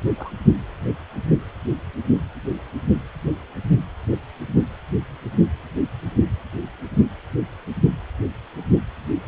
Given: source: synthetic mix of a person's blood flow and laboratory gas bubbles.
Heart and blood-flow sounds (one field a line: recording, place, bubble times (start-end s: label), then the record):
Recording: Doppler ultrasound of blood flow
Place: precordium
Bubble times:
0.17-0.32 s: bubbles
From the record:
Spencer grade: 2 (many but less than half of the cardiac periods contain bubble signals, singularly or in groups)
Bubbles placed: only in the low amplitude regions of the cardiac cycle